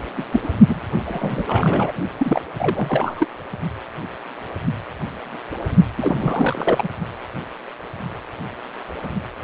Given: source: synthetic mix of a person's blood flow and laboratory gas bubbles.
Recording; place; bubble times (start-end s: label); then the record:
Doppler ultrasound of blood flow; precordium
0.17-0.24 s: bubbles
0.32-0.48 s: bubbles
0.68-0.80 s: bubbles
1.05-1.93 s: bubbles
2.17-2.41 s: bubbles
2.59-3.26 s: bubbles
5.98-6.88 s: bubbles
From the record:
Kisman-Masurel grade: 332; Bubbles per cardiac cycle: rolling drumbeat, 9 or more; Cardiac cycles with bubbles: 50 to 99%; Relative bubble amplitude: moderate (0.250 to 0.450); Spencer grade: 3 (all of the cardiac periods contain showers or single bubble signals, but not dominating or overriding the cardiac motion signals); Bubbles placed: only in the low amplitude regions of the cardiac cycle